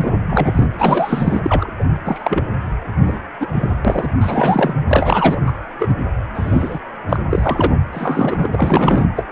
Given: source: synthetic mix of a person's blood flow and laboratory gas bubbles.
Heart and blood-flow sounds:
Doppler ultrasound of blood flow; precordium
0.00-0.12 s: bubbles
0.29-0.66 s: bubbles
0.78-1.40 s: bubbles
1.44-1.71 s: bubbles
1.79-1.84 s: bubbles
2.04-2.44 s: bubbles
3.05-3.19 s: bubbles
3.40-3.48 s: bubbles
3.52-3.75 s: bubbles
3.84-4.13 s: bubbles
4.20-4.74 s: bubbles
4.88-5.40 s: bubbles
5.46-5.52 s: bubbles
5.79-5.93 s: bubbles
6.34-6.79 s: bubbles
7.09-7.16 s: bubbles
7.29-7.72 s: bubbles
7.92-8.49 s: bubbles
8.52-9.07 s: bubbles
9.17-9.25 s: bubbles
From the record:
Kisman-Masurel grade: 233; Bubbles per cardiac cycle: several, 3 to 8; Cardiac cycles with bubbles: 50 to 99%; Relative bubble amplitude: loud (0.450 to 0.775); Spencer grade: 3 (all of the cardiac periods contain showers or single bubble signals, but not dominating or overriding the cardiac motion signals); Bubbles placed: anywhere in the cardiac cycle

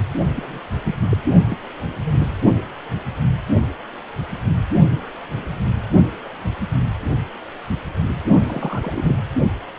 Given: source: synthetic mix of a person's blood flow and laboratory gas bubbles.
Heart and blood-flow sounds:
Doppler ultrasound of blood flow; precordium
0.35-0.60 s: bubbles
0.85-0.94 s: bubbles
1.09-1.17 s: bubbles
1.49-1.56 s: bubbles
1.81-1.86 s: bubbles
2.04-2.26 s: bubbles
8.46-9.18 s: bubbles
From the record:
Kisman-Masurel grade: 221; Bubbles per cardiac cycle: several, 3 to 8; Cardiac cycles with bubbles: 10 to 50%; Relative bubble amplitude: barely perceptible (0.100 to 0.250); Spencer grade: 2 (many but less than half of the cardiac periods contain bubble signals, singularly or in groups); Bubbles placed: only in the low amplitude regions of the cardiac cycle

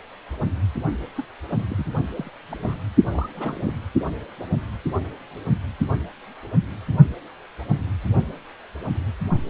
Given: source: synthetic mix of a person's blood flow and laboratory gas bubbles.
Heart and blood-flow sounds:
Doppler ultrasound of blood flow; precordium
1.17-1.25 s: bubbles
1.50-1.64 s: bubbles
1.69-1.85 s: bubbles
2.10-2.31 s: bubbles
2.49-2.77 s: bubbles
3.10-3.71 s: bubbles
From the record:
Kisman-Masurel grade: 221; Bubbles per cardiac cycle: several, 3 to 8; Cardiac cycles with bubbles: 10 to 50%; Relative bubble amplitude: barely perceptible (0.100 to 0.250); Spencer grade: 2 (many but less than half of the cardiac periods contain bubble signals, singularly or in groups); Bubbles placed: only in the low amplitude regions of the cardiac cycle

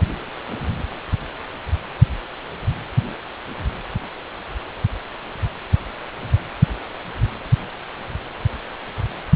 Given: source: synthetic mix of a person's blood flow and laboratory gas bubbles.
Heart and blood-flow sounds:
Doppler ultrasound of blood flow; precordium
no bubbles
From the record:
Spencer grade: 0 (complete lack of bubble signals)

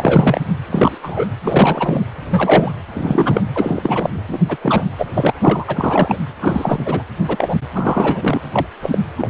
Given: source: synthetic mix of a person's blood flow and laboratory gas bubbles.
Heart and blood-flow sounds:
Doppler ultrasound of blood flow; precordium
0.00-0.41 s: bubbles
0.70-0.99 s: bubbles
1.03-1.26 s: bubbles
1.44-2.05 s: bubbles
2.30-2.71 s: bubbles
2.94-3.41 s: bubbles
3.54-4.22 s: bubbles
4.27-4.40 s: bubbles
4.48-4.56 s: bubbles
4.61-4.83 s: bubbles
4.98-5.06 s: bubbles
5.13-5.33 s: bubbles
5.41-5.64 s: bubbles
5.67-6.18 s: bubbles
6.40-7.02 s: bubbles
7.27-7.56 s: bubbles
7.73-8.41 s: bubbles
8.53-8.67 s: bubbles
8.82-8.98 s: bubbles
9.16-9.29 s: bubbles
From the record:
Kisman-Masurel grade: 243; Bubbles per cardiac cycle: several, 3 to 8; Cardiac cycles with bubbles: 100%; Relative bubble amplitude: loud (0.450 to 0.775); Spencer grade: 3 (all of the cardiac periods contain showers or single bubble signals, but not dominating or overriding the cardiac motion signals); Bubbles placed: anywhere in the cardiac cycle

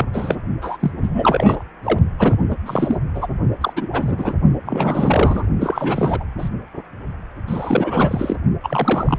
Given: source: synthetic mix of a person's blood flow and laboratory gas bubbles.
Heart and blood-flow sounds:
Doppler ultrasound of blood flow; precordium
0.00-0.06 s: bubbles
0.13-0.36 s: bubbles
0.61-0.77 s: bubbles
0.80-0.92 s: bubbles
0.99-1.64 s: bubbles
1.83-1.99 s: bubbles
2.19-2.37 s: bubbles
2.50-2.55 s: bubbles
2.65-2.97 s: bubbles
3.15-3.27 s: bubbles
3.60-3.73 s: bubbles
3.76-3.89 s: bubbles
3.92-4.33 s: bubbles
4.66-5.47 s: bubbles
5.61-6.24 s: bubbles
6.39-6.49 s: bubbles
7.46-8.37 s: bubbles
8.63-9.19 s: bubbles
From the record:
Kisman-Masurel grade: 342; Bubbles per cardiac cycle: rolling drumbeat, 9 or more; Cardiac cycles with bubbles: 100%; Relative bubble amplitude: moderate (0.250 to 0.450); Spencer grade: 3 (all of the cardiac periods contain showers or single bubble signals, but not dominating or overriding the cardiac motion signals); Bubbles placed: only in the low amplitude regions of the cardiac cycle

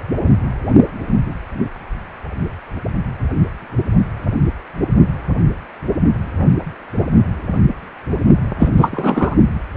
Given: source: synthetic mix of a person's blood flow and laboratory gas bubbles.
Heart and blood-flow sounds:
Doppler ultrasound of blood flow; precordium
8.59-8.69 s: bubbles
8.77-9.36 s: bubbles
From the record:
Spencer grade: 1 (occasional bubble signal discernible with the cardiac motion signal, with majority of cardiac periods free of bubbles); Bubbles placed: only in the low amplitude regions of the cardiac cycle

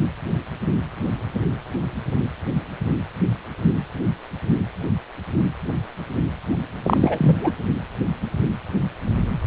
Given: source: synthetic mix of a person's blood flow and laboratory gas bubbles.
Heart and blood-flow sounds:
Doppler ultrasound of blood flow; precordium
6.83-7.51 s: bubbles
From the record:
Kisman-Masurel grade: 213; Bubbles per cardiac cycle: several, 3 to 8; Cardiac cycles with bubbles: 1 to 10%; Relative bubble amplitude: loud (0.450 to 0.775); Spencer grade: 1 (occasional bubble signal discernible with the cardiac motion signal, with majority of cardiac periods free of bubbles); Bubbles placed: anywhere in the cardiac cycle

